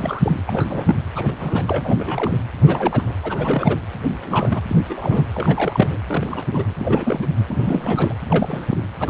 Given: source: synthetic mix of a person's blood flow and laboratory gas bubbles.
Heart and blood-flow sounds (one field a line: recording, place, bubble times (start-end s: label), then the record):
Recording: Doppler ultrasound of blood flow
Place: precordium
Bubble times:
0.00-0.43 s: bubbles
0.47-1.03 s: bubbles
1.15-1.33 s: bubbles
1.39-2.39 s: bubbles
2.60-3.12 s: bubbles
3.22-3.78 s: bubbles
4.10-4.61 s: bubbles
4.69-4.77 s: bubbles
4.89-5.25 s: bubbles
5.35-5.99 s: bubbles
6.07-6.46 s: bubbles
6.52-6.73 s: bubbles
6.79-7.28 s: bubbles
7.47-8.15 s: bubbles
8.28-8.84 s: bubbles
8.99-9.10 s: bubbles
From the record:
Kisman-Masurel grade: 332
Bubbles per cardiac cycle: rolling drumbeat, 9 or more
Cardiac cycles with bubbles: 50 to 99%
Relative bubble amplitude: moderate (0.250 to 0.450)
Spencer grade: 3 (all of the cardiac periods contain showers or single bubble signals, but not dominating or overriding the cardiac motion signals)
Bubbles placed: anywhere in the cardiac cycle